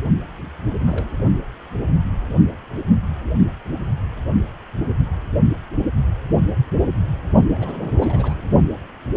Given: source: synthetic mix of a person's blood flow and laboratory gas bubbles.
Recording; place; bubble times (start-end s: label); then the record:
Doppler ultrasound of blood flow; precordium
0.38-0.49 s: bubbles
0.82-1.21 s: bubbles
7.54-8.34 s: bubbles
From the record:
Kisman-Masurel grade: 221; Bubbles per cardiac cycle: several, 3 to 8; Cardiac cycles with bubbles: 10 to 50%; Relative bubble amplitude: barely perceptible (0.100 to 0.250); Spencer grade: 2 (many but less than half of the cardiac periods contain bubble signals, singularly or in groups); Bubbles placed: only in the low amplitude regions of the cardiac cycle